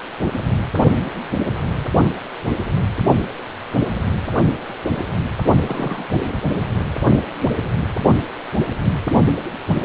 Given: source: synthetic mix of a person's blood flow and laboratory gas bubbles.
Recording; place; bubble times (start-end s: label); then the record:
Doppler ultrasound of blood flow; precordium
5.62-6.07 s: bubbles
6.12-6.28 s: bubbles
From the record:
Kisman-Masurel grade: 211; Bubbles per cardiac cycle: several, 3 to 8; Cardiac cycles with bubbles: 1 to 10%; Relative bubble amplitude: barely perceptible (0.100 to 0.250); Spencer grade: 1 (occasional bubble signal discernible with the cardiac motion signal, with majority of cardiac periods free of bubbles); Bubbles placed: only in the low amplitude regions of the cardiac cycle